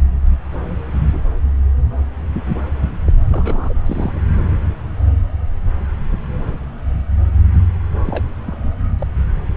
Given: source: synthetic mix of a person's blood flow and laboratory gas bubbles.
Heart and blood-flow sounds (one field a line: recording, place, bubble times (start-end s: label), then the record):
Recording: Doppler ultrasound of blood flow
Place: subclavian vein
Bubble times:
3.06-3.13 s: bubbles
3.25-3.74 s: bubbles
3.85-4.20 s: bubbles
8.05-8.23 s: bubbles
8.46-8.57 s: bubbles
8.99-9.07 s: bubbles
From the record:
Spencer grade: 2 (many but less than half of the cardiac periods contain bubble signals, singularly or in groups)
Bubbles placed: anywhere in the cardiac cycle